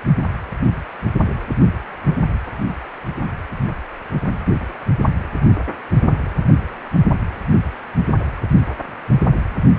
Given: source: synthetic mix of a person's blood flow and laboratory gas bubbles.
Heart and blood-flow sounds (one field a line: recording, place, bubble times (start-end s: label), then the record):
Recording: Doppler ultrasound of blood flow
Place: precordium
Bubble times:
no bubbles
From the record:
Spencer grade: 0 (complete lack of bubble signals)